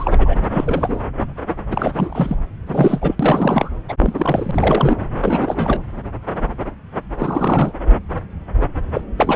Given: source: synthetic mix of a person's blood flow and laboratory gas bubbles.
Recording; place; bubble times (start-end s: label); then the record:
Doppler ultrasound of blood flow; subclavian vein
0.00-0.16 s: bubbles
0.18-0.36 s: bubbles
0.51-0.99 s: bubbles
1.71-2.36 s: bubbles
2.67-3.16 s: bubbles
3.19-3.70 s: bubbles
3.88-3.94 s: bubbles
3.98-4.96 s: bubbles
5.00-5.05 s: bubbles
5.21-5.83 s: bubbles
7.18-7.73 s: bubbles
8.93-9.01 s: bubbles
9.17-9.36 s: bubbles
From the record:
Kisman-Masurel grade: 333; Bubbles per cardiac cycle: rolling drumbeat, 9 or more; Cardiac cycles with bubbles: 50 to 99%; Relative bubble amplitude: loud (0.450 to 0.775); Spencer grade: 3 (all of the cardiac periods contain showers or single bubble signals, but not dominating or overriding the cardiac motion signals); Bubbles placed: anywhere in the cardiac cycle